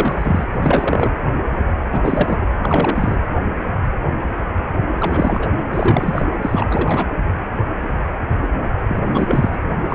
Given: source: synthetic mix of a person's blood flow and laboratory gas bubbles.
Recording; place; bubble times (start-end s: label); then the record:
Doppler ultrasound of blood flow; precordium
0.00-0.45 s: bubbles
0.52-1.10 s: bubbles
1.86-2.38 s: bubbles
2.62-3.15 s: bubbles
5.00-5.49 s: bubbles
5.71-6.26 s: bubbles
6.42-7.07 s: bubbles
8.88-9.59 s: bubbles
9.89-9.95 s: bubbles
From the record:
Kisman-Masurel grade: 333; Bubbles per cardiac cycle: rolling drumbeat, 9 or more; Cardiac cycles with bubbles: 50 to 99%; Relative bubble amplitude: loud (0.450 to 0.775); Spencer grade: 3 (all of the cardiac periods contain showers or single bubble signals, but not dominating or overriding the cardiac motion signals); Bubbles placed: anywhere in the cardiac cycle